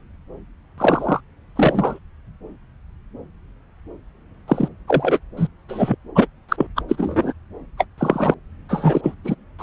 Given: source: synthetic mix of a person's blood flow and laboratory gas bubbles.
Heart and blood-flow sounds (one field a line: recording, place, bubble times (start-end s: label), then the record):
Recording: Doppler ultrasound of blood flow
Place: subclavian vein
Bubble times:
0.78-1.21 s: bubbles
1.56-1.99 s: bubbles
4.48-4.69 s: bubbles
4.88-5.19 s: bubbles
5.37-5.47 s: bubbles
5.69-5.96 s: bubbles
6.15-6.27 s: bubbles
6.49-6.67 s: bubbles
6.75-6.82 s: bubbles
6.88-7.33 s: bubbles
7.78-7.84 s: bubbles
7.98-8.35 s: bubbles
8.69-9.14 s: bubbles
9.24-9.34 s: bubbles
9.58-9.63 s: bubbles
From the record:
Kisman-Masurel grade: 233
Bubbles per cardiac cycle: several, 3 to 8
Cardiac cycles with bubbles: 50 to 99%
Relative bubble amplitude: loud (0.450 to 0.775)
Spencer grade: 3 (all of the cardiac periods contain showers or single bubble signals, but not dominating or overriding the cardiac motion signals)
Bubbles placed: anywhere in the cardiac cycle